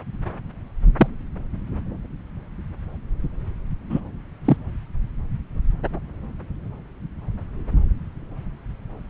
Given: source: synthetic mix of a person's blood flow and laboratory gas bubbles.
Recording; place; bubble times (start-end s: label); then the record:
Doppler ultrasound of blood flow; subclavian vein
0.97-1.07 s: bubbles
3.90-4.00 s: bubbles
4.45-4.57 s: bubbles
From the record:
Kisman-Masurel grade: 123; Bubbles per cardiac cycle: 1 to 2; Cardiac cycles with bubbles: 10 to 50%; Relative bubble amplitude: loud (0.450 to 0.775); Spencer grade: 2 (many but less than half of the cardiac periods contain bubble signals, singularly or in groups); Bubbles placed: anywhere in the cardiac cycle